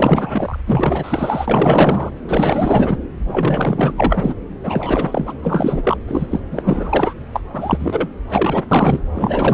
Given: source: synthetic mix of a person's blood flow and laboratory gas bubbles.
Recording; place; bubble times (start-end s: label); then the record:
Doppler ultrasound of blood flow; subclavian vein
0.00-0.58 s: bubbles
0.67-2.11 s: bubbles
2.27-2.97 s: bubbles
3.23-3.94 s: bubbles
3.96-4.34 s: bubbles
4.63-5.34 s: bubbles
5.42-5.97 s: bubbles
6.07-6.27 s: bubbles
6.30-6.40 s: bubbles
6.51-7.14 s: bubbles
7.32-7.40 s: bubbles
7.53-8.09 s: bubbles
8.29-8.64 s: bubbles
8.71-9.00 s: bubbles
9.14-9.54 s: bubbles
From the record:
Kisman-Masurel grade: 444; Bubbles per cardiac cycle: continuous sound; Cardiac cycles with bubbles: 100%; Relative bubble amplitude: maximal (0.775 to 0.999); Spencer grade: 4 (maximum detectable bubble signal sounding continuously throughout systole and diastole of every cardiac period, and overriding the amplitude of the normal cardiac signals); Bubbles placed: anywhere in the cardiac cycle